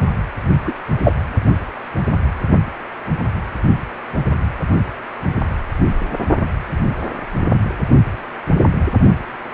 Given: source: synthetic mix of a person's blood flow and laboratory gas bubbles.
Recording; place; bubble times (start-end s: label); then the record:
Doppler ultrasound of blood flow; precordium
0.65-0.74 s: bubbles
1.04-1.12 s: bubbles
From the record:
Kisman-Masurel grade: 113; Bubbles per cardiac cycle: 1 to 2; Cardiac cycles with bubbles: 1 to 10%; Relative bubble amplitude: loud (0.450 to 0.775); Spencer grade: 1 (occasional bubble signal discernible with the cardiac motion signal, with majority of cardiac periods free of bubbles); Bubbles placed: only in the low amplitude regions of the cardiac cycle